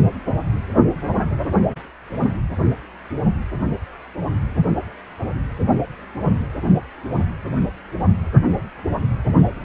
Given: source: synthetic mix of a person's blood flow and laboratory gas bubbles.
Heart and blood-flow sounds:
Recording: Doppler ultrasound of blood flow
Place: precordium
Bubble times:
8.00-8.10 s: bubbles
From the record:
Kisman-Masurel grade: 111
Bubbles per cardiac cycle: 1 to 2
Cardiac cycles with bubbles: 1 to 10%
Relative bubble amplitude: barely perceptible (0.100 to 0.250)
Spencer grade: 1 (occasional bubble signal discernible with the cardiac motion signal, with majority of cardiac periods free of bubbles)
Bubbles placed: anywhere in the cardiac cycle

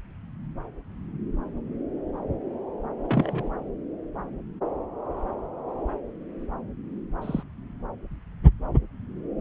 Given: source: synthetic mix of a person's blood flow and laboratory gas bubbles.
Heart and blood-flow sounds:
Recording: Doppler ultrasound of blood flow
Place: subclavian vein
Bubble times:
3.03-3.50 s: bubbles
7.22-7.43 s: bubbles
From the record:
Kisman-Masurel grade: 121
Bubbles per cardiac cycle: 1 to 2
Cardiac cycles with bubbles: 10 to 50%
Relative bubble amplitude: barely perceptible (0.100 to 0.250)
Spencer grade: 2 (many but less than half of the cardiac periods contain bubble signals, singularly or in groups)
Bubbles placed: anywhere in the cardiac cycle

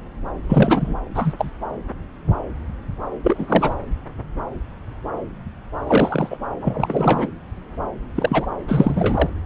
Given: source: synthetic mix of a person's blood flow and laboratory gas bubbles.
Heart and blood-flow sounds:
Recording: Doppler ultrasound of blood flow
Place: subclavian vein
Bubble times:
0.48-0.94 s: bubbles
1.14-1.33 s: bubbles
1.38-1.51 s: bubbles
3.23-3.74 s: bubbles
5.87-6.38 s: bubbles
6.62-7.28 s: bubbles
8.15-8.46 s: bubbles
8.67-9.29 s: bubbles
From the record:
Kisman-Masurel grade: 223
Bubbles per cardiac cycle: several, 3 to 8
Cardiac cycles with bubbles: 10 to 50%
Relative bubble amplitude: loud (0.450 to 0.775)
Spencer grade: 2 (many but less than half of the cardiac periods contain bubble signals, singularly or in groups)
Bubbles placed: anywhere in the cardiac cycle

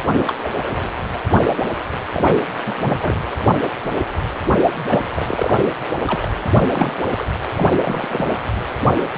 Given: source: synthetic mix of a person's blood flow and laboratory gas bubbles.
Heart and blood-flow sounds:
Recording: Doppler ultrasound of blood flow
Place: precordium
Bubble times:
0.03-0.24 s: bubbles
0.27-0.85 s: bubbles
2.14-2.41 s: bubbles
2.65-3.15 s: bubbles
4.90-5.03 s: bubbles
5.15-5.63 s: bubbles
6.07-6.32 s: bubbles
6.75-6.94 s: bubbles
7.17-7.25 s: bubbles
7.54-7.68 s: bubbles
7.72-8.35 s: bubbles
From the record:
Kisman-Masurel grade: 332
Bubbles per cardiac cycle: rolling drumbeat, 9 or more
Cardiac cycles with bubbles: 50 to 99%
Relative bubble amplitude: moderate (0.250 to 0.450)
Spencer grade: 3 (all of the cardiac periods contain showers or single bubble signals, but not dominating or overriding the cardiac motion signals)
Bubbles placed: anywhere in the cardiac cycle

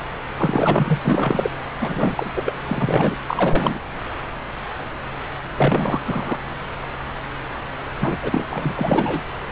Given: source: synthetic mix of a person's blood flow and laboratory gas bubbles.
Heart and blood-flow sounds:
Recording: Doppler ultrasound of blood flow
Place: subclavian vein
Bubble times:
0.37-0.99 s: bubbles
1.02-1.52 s: bubbles
1.80-2.31 s: bubbles
2.35-2.42 s: bubbles
2.46-2.52 s: bubbles
2.66-3.15 s: bubbles
3.27-3.79 s: bubbles
5.57-6.00 s: bubbles
6.05-6.40 s: bubbles
8.00-8.18 s: bubbles
8.23-8.46 s: bubbles
8.50-8.72 s: bubbles
8.76-9.22 s: bubbles
From the record:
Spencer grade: 3 (all of the cardiac periods contain showers or single bubble signals, but not dominating or overriding the cardiac motion signals)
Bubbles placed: anywhere in the cardiac cycle

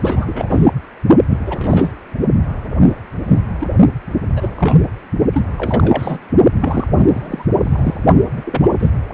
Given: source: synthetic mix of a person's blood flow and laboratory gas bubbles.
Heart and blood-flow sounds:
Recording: Doppler ultrasound of blood flow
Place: precordium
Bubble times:
0.01-0.73 s: bubbles
1.30-1.39 s: bubbles
1.46-1.92 s: bubbles
2.85-2.94 s: bubbles
3.27-3.41 s: bubbles
3.60-3.68 s: bubbles
4.35-4.49 s: bubbles
4.56-4.88 s: bubbles
5.32-5.45 s: bubbles
5.58-6.19 s: bubbles
6.56-6.88 s: bubbles
6.95-7.45 s: bubbles
7.61-8.01 s: bubbles
8.37-8.60 s: bubbles
8.62-8.68 s: bubbles
8.79-8.91 s: bubbles
From the record:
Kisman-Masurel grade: 243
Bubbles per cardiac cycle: several, 3 to 8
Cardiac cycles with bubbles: 100%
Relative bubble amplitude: loud (0.450 to 0.775)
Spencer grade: 3 (all of the cardiac periods contain showers or single bubble signals, but not dominating or overriding the cardiac motion signals)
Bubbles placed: only in the low amplitude regions of the cardiac cycle

